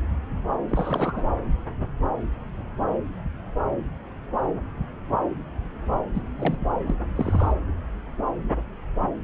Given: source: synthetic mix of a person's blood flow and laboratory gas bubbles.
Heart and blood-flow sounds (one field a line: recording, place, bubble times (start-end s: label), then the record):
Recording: Doppler ultrasound of blood flow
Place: subclavian vein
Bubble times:
0.68-1.24 s: bubbles
6.14-6.22 s: bubbles
6.38-6.58 s: bubbles
6.61-6.66 s: bubbles
6.86-6.95 s: bubbles
7.15-7.51 s: bubbles
From the record:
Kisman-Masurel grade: 222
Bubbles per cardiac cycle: several, 3 to 8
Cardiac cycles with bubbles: 10 to 50%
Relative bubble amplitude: moderate (0.250 to 0.450)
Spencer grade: 2 (many but less than half of the cardiac periods contain bubble signals, singularly or in groups)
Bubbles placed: anywhere in the cardiac cycle